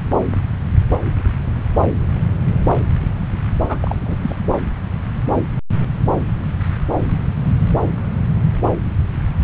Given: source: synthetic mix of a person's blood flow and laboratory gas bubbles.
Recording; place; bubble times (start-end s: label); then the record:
Doppler ultrasound of blood flow; subclavian vein
3.69-3.77 s: bubbles
3.81-3.97 s: bubbles
4.02-4.15 s: bubbles
4.22-4.36 s: bubbles
From the record:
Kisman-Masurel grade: 212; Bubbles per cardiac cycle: several, 3 to 8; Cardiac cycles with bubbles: 1 to 10%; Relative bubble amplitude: moderate (0.250 to 0.450); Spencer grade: 1 (occasional bubble signal discernible with the cardiac motion signal, with majority of cardiac periods free of bubbles); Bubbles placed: anywhere in the cardiac cycle